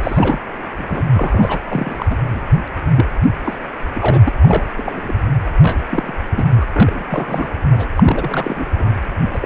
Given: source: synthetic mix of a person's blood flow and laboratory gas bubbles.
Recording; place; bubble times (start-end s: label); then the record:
Doppler ultrasound of blood flow; precordium
0.03-0.40 s: bubbles
0.77-1.03 s: bubbles
1.13-1.59 s: bubbles
1.68-2.06 s: bubbles
2.10-2.16 s: bubbles
2.33-2.43 s: bubbles
2.96-3.05 s: bubbles
3.45-3.58 s: bubbles
3.95-4.21 s: bubbles
4.24-4.32 s: bubbles
4.35-4.69 s: bubbles
4.76-5.13 s: bubbles
5.61-5.77 s: bubbles
5.89-6.13 s: bubbles
6.32-6.44 s: bubbles
6.57-6.65 s: bubbles
6.72-7.48 s: bubbles
7.72-7.87 s: bubbles
7.96-8.65 s: bubbles
8.75-8.98 s: bubbles
9.33-9.39 s: bubbles
9.41-9.46 s: bubbles
From the record:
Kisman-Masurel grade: 242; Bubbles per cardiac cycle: several, 3 to 8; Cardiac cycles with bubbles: 100%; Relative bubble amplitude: moderate (0.250 to 0.450); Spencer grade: 3 (all of the cardiac periods contain showers or single bubble signals, but not dominating or overriding the cardiac motion signals); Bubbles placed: anywhere in the cardiac cycle